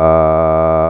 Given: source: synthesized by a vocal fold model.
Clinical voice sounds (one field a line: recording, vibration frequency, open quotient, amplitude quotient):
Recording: sustained vowel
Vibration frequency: 80 Hz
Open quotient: 0.4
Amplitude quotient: 1.4